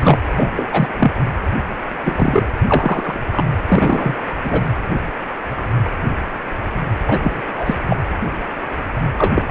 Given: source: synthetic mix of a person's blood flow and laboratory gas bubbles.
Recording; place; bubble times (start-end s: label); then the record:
Doppler ultrasound of blood flow; precordium
0.00-0.19 s: bubbles
0.32-0.50 s: bubbles
0.56-0.70 s: bubbles
0.72-0.89 s: bubbles
0.98-1.11 s: bubbles
2.06-2.44 s: bubbles
2.67-3.20 s: bubbles
3.31-3.44 s: bubbles
3.68-4.17 s: bubbles
4.44-4.61 s: bubbles
7.07-7.42 s: bubbles
7.57-7.75 s: bubbles
7.88-7.96 s: bubbles
9.18-9.44 s: bubbles
From the record:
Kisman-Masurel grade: 233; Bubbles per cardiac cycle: several, 3 to 8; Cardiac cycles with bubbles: 50 to 99%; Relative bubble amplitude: loud (0.450 to 0.775); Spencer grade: 3 (all of the cardiac periods contain showers or single bubble signals, but not dominating or overriding the cardiac motion signals); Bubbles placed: anywhere in the cardiac cycle